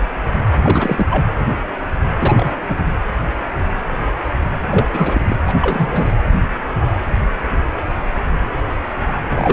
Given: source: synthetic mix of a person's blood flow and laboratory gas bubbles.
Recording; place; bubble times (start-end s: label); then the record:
Doppler ultrasound of blood flow; precordium
0.63-1.06 s: bubbles
1.10-1.26 s: bubbles
2.21-2.55 s: bubbles
2.67-2.78 s: bubbles
4.67-5.36 s: bubbles
5.46-5.55 s: bubbles
5.62-6.14 s: bubbles
9.29-9.53 s: bubbles
From the record:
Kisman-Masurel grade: 222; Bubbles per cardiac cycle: several, 3 to 8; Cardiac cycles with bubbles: 10 to 50%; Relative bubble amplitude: moderate (0.250 to 0.450); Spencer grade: 2 (many but less than half of the cardiac periods contain bubble signals, singularly or in groups); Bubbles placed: anywhere in the cardiac cycle